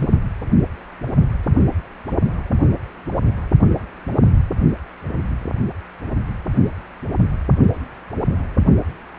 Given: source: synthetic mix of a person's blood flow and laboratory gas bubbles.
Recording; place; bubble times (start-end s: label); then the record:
Doppler ultrasound of blood flow; precordium
0.00-0.09 s: bubbles
From the record:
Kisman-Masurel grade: 212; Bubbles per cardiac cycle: several, 3 to 8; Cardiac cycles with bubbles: 1 to 10%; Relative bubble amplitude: moderate (0.250 to 0.450); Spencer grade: 1 (occasional bubble signal discernible with the cardiac motion signal, with majority of cardiac periods free of bubbles); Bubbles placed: only in the low amplitude regions of the cardiac cycle